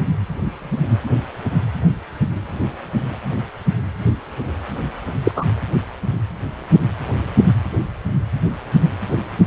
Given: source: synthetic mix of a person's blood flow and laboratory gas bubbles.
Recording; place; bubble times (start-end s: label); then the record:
Doppler ultrasound of blood flow; precordium
5.24-5.32 s: bubbles
5.36-5.46 s: bubbles
From the record:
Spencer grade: 1 (occasional bubble signal discernible with the cardiac motion signal, with majority of cardiac periods free of bubbles); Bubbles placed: anywhere in the cardiac cycle